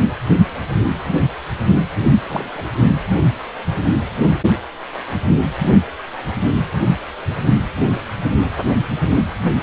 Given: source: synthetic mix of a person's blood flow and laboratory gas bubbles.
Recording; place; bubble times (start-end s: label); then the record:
Doppler ultrasound of blood flow; precordium
2.28-2.49 s: bubbles
2.54-2.70 s: bubbles
From the record:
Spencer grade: 2 (many but less than half of the cardiac periods contain bubble signals, singularly or in groups); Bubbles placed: only in the low amplitude regions of the cardiac cycle